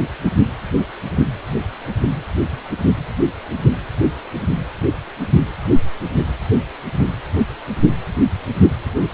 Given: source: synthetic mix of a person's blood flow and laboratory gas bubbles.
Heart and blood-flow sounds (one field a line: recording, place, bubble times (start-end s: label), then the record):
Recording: Doppler ultrasound of blood flow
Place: precordium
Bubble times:
no bubbles
From the record:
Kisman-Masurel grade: 000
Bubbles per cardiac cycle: 0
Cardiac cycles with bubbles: 0%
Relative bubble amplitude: no bubbles discernible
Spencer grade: 0 (complete lack of bubble signals)